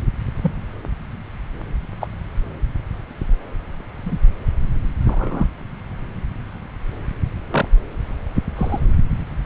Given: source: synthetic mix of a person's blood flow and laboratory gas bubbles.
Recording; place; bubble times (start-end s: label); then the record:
Doppler ultrasound of blood flow; subclavian vein
0.41-0.52 s: bubbles
2.00-2.08 s: bubbles
4.05-4.18 s: bubbles
5.05-5.46 s: bubbles
7.50-7.69 s: bubbles
8.55-8.79 s: bubbles
From the record:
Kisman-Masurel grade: 122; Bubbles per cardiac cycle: 1 to 2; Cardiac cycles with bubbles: 10 to 50%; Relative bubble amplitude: moderate (0.250 to 0.450); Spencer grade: 2 (many but less than half of the cardiac periods contain bubble signals, singularly or in groups); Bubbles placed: anywhere in the cardiac cycle